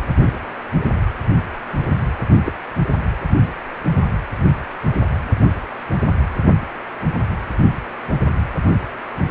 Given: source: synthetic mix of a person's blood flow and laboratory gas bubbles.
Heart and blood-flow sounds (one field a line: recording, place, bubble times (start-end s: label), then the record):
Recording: Doppler ultrasound of blood flow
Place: precordium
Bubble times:
0.23-0.31 s: bubbles
2.44-2.52 s: bubbles
From the record:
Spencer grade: 2 (many but less than half of the cardiac periods contain bubble signals, singularly or in groups)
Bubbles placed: anywhere in the cardiac cycle